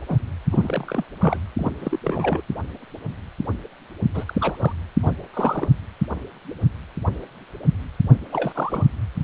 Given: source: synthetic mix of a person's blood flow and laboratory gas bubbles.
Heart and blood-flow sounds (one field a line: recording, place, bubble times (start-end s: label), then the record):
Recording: Doppler ultrasound of blood flow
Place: precordium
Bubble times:
0.07-0.18 s: bubbles
0.51-1.04 s: bubbles
1.21-1.39 s: bubbles
1.59-1.72 s: bubbles
1.80-1.99 s: bubbles
2.04-2.42 s: bubbles
4.13-4.25 s: bubbles
4.28-4.72 s: bubbles
5.02-5.15 s: bubbles
5.33-5.68 s: bubbles
8.32-8.86 s: bubbles
From the record:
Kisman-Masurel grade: 332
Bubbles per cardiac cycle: rolling drumbeat, 9 or more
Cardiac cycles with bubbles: 50 to 99%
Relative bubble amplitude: moderate (0.250 to 0.450)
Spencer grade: 3 (all of the cardiac periods contain showers or single bubble signals, but not dominating or overriding the cardiac motion signals)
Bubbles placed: only in the low amplitude regions of the cardiac cycle